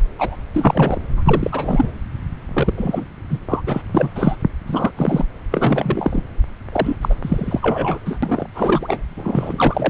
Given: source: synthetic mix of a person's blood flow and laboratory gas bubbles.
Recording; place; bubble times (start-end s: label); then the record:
Doppler ultrasound of blood flow; subclavian vein
0.18-0.36 s: bubbles
0.53-1.01 s: bubbles
1.16-1.92 s: bubbles
2.53-2.73 s: bubbles
2.77-3.06 s: bubbles
3.29-3.40 s: bubbles
3.48-3.61 s: bubbles
3.66-3.81 s: bubbles
3.94-4.09 s: bubbles
4.15-4.37 s: bubbles
4.67-4.92 s: bubbles
4.97-5.25 s: bubbles
5.51-6.24 s: bubbles
6.72-6.97 s: bubbles
7.01-7.15 s: bubbles
7.22-7.99 s: bubbles
8.05-8.19 s: bubbles
8.22-8.46 s: bubbles
8.54-9.04 s: bubbles
9.15-9.90 s: bubbles
From the record:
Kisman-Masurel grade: 343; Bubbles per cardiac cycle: rolling drumbeat, 9 or more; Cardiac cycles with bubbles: 100%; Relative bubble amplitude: loud (0.450 to 0.775); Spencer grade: 3 (all of the cardiac periods contain showers or single bubble signals, but not dominating or overriding the cardiac motion signals); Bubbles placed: anywhere in the cardiac cycle